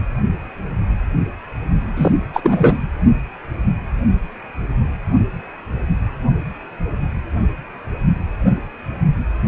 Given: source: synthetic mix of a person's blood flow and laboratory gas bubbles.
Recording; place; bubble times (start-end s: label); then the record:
Doppler ultrasound of blood flow; precordium
1.96-2.12 s: bubbles
2.33-2.79 s: bubbles
From the record:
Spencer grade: 1 (occasional bubble signal discernible with the cardiac motion signal, with majority of cardiac periods free of bubbles); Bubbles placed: only in the low amplitude regions of the cardiac cycle